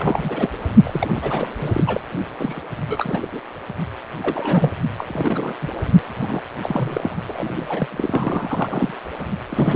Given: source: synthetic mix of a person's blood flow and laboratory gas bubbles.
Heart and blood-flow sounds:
Doppler ultrasound of blood flow; precordium
0.00-0.49 s: bubbles
0.83-1.10 s: bubbles
1.13-1.48 s: bubbles
1.58-2.00 s: bubbles
2.38-2.62 s: bubbles
2.88-3.40 s: bubbles
4.22-4.71 s: bubbles
4.98-5.54 s: bubbles
5.62-5.68 s: bubbles
6.16-6.44 s: bubbles
6.62-7.16 s: bubbles
7.27-7.88 s: bubbles
7.91-8.94 s: bubbles
9.49-9.76 s: bubbles
From the record:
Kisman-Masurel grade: 342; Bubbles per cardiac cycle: rolling drumbeat, 9 or more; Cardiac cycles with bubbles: 100%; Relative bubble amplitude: moderate (0.250 to 0.450); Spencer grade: 3 (all of the cardiac periods contain showers or single bubble signals, but not dominating or overriding the cardiac motion signals); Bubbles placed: only in the low amplitude regions of the cardiac cycle

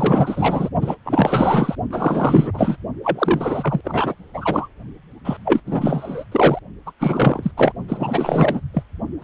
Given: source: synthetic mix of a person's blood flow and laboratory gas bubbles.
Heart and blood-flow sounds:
Doppler ultrasound of blood flow; precordium
0.00-0.70 s: bubbles
0.81-0.95 s: bubbles
1.04-1.76 s: bubbles
1.91-2.76 s: bubbles
3.04-3.81 s: bubbles
3.84-4.14 s: bubbles
4.33-4.68 s: bubbles
5.24-5.37 s: bubbles
5.44-5.60 s: bubbles
5.65-6.24 s: bubbles
6.31-6.59 s: bubbles
6.86-6.92 s: bubbles
7.00-7.52 s: bubbles
7.56-7.72 s: bubbles
7.88-8.61 s: bubbles
8.73-8.83 s: bubbles
9.21-9.24 s: bubbles
From the record:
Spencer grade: 4 (maximum detectable bubble signal sounding continuously throughout systole and diastole of every cardiac period, and overriding the amplitude of the normal cardiac signals); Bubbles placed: only in the low amplitude regions of the cardiac cycle

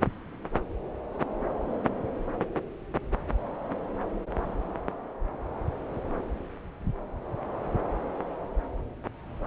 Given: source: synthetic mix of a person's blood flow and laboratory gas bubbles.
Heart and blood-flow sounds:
Doppler ultrasound of blood flow; subclavian vein
no bubbles
From the record:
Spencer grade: 0 (complete lack of bubble signals)

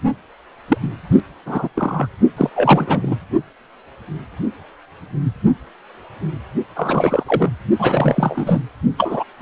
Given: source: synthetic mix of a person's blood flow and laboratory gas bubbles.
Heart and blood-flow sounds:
Doppler ultrasound of blood flow; precordium
0.68-0.77 s: bubbles
0.82-0.88 s: bubbles
1.11-1.20 s: bubbles
1.46-1.68 s: bubbles
1.75-2.07 s: bubbles
2.36-2.50 s: bubbles
2.55-3.16 s: bubbles
6.76-7.23 s: bubbles
7.27-7.51 s: bubbles
7.79-8.61 s: bubbles
8.97-9.24 s: bubbles
9.39-9.42 s: bubbles
From the record:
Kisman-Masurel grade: 233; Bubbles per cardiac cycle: several, 3 to 8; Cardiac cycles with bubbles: 50 to 99%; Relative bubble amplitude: loud (0.450 to 0.775); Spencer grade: 3 (all of the cardiac periods contain showers or single bubble signals, but not dominating or overriding the cardiac motion signals); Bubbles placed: only in the low amplitude regions of the cardiac cycle

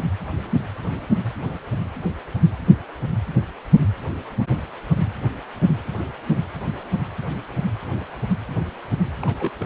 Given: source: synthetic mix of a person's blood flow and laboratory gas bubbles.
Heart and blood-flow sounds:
Doppler ultrasound of blood flow; precordium
9.21-9.51 s: bubbles
9.59-9.66 s: bubbles
From the record:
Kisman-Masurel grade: 211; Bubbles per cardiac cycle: several, 3 to 8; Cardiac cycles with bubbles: 1 to 10%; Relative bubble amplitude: barely perceptible (0.100 to 0.250); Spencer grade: 1 (occasional bubble signal discernible with the cardiac motion signal, with majority of cardiac periods free of bubbles); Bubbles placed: anywhere in the cardiac cycle

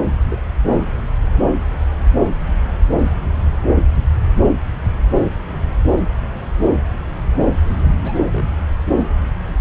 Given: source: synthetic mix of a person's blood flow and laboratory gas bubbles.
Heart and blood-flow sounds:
Doppler ultrasound of blood flow; subclavian vein
0.29-0.36 s: bubbles
0.69-0.75 s: bubbles
0.85-0.92 s: bubbles
7.79-7.87 s: bubbles
8.03-8.48 s: bubbles
From the record:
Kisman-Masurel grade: 221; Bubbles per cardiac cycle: several, 3 to 8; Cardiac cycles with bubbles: 10 to 50%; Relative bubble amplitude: barely perceptible (0.100 to 0.250); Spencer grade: 2 (many but less than half of the cardiac periods contain bubble signals, singularly or in groups); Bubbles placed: anywhere in the cardiac cycle

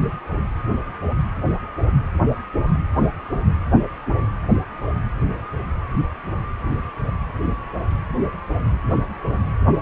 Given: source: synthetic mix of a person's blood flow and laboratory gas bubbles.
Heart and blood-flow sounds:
Doppler ultrasound of blood flow; precordium
no bubbles
From the record:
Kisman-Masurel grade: 000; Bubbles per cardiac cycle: 0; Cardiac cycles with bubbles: 0%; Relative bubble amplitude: no bubbles discernible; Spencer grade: 0 (complete lack of bubble signals)

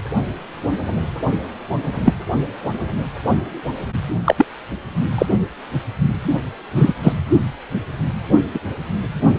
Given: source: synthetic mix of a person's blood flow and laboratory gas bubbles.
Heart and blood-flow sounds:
Doppler ultrasound of blood flow; precordium
2.05-2.14 s: bubbles
4.25-4.45 s: bubbles
5.18-5.26 s: bubbles
6.75-6.93 s: bubbles
7.03-7.12 s: bubbles
8.54-8.59 s: bubbles
From the record:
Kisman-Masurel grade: 123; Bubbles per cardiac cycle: 1 to 2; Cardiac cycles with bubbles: 10 to 50%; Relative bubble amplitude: loud (0.450 to 0.775); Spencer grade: 2 (many but less than half of the cardiac periods contain bubble signals, singularly or in groups); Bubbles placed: anywhere in the cardiac cycle

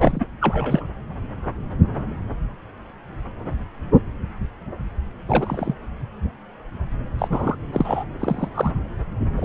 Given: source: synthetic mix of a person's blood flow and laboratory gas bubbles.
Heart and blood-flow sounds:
Doppler ultrasound of blood flow; subclavian vein
0.00-0.27 s: bubbles
0.40-0.85 s: bubbles
5.27-5.73 s: bubbles
7.18-7.56 s: bubbles
7.72-8.04 s: bubbles
8.20-8.48 s: bubbles
8.54-8.72 s: bubbles
9.37-9.45 s: bubbles
From the record:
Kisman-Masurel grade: 232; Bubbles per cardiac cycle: several, 3 to 8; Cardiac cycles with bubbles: 50 to 99%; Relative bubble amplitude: moderate (0.250 to 0.450); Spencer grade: 3 (all of the cardiac periods contain showers or single bubble signals, but not dominating or overriding the cardiac motion signals); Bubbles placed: anywhere in the cardiac cycle

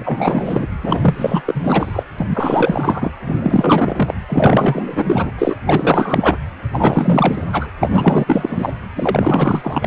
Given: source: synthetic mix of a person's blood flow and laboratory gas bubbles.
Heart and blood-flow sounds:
Doppler ultrasound of blood flow; precordium
0.00-0.67 s: bubbles
0.83-1.42 s: bubbles
1.45-2.03 s: bubbles
2.19-2.26 s: bubbles
2.29-3.11 s: bubbles
3.25-4.14 s: bubbles
4.28-5.31 s: bubbles
5.38-5.56 s: bubbles
5.66-6.37 s: bubbles
6.72-7.44 s: bubbles
7.52-7.71 s: bubbles
7.80-8.74 s: bubbles
8.95-9.87 s: bubbles
From the record:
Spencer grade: 4 (maximum detectable bubble signal sounding continuously throughout systole and diastole of every cardiac period, and overriding the amplitude of the normal cardiac signals); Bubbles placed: anywhere in the cardiac cycle

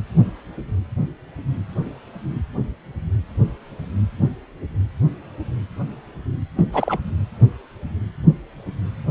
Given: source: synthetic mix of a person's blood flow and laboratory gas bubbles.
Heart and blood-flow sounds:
Doppler ultrasound of blood flow; precordium
6.57-6.66 s: bubbles
6.73-7.00 s: bubbles
From the record:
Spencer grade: 2 (many but less than half of the cardiac periods contain bubble signals, singularly or in groups); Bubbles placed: anywhere in the cardiac cycle

